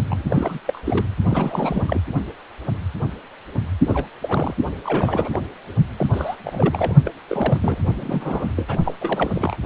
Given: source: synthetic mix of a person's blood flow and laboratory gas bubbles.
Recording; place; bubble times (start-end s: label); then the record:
Doppler ultrasound of blood flow; precordium
0.10-0.59 s: bubbles
0.67-0.80 s: bubbles
0.85-1.06 s: bubbles
1.28-2.00 s: bubbles
3.85-4.06 s: bubbles
4.22-4.54 s: bubbles
4.84-5.42 s: bubbles
5.96-6.07 s: bubbles
6.12-6.36 s: bubbles
6.44-6.93 s: bubbles
7.05-7.12 s: bubbles
7.29-7.78 s: bubbles
7.97-8.77 s: bubbles
8.85-8.93 s: bubbles
9.01-9.32 s: bubbles
9.35-9.57 s: bubbles
From the record:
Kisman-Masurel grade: 332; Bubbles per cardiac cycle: rolling drumbeat, 9 or more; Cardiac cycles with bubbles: 50 to 99%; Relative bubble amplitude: moderate (0.250 to 0.450); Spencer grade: 3 (all of the cardiac periods contain showers or single bubble signals, but not dominating or overriding the cardiac motion signals); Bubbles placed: only in the low amplitude regions of the cardiac cycle